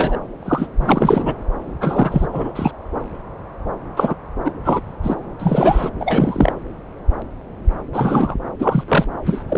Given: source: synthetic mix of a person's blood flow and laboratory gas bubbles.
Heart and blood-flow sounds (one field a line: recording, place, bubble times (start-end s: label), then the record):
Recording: Doppler ultrasound of blood flow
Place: subclavian vein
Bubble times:
0.00-0.20 s: bubbles
0.42-0.67 s: bubbles
0.79-1.35 s: bubbles
1.81-2.27 s: bubbles
2.33-2.71 s: bubbles
3.96-4.14 s: bubbles
4.44-4.51 s: bubbles
4.64-4.80 s: bubbles
5.03-5.15 s: bubbles
5.39-5.90 s: bubbles
6.00-6.52 s: bubbles
7.93-8.35 s: bubbles
8.59-8.83 s: bubbles
8.88-9.05 s: bubbles
9.25-9.43 s: bubbles
9.48-9.58 s: bubbles
From the record:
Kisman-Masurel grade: 233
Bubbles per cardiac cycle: several, 3 to 8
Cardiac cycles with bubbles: 50 to 99%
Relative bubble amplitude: loud (0.450 to 0.775)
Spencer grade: 3 (all of the cardiac periods contain showers or single bubble signals, but not dominating or overriding the cardiac motion signals)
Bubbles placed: anywhere in the cardiac cycle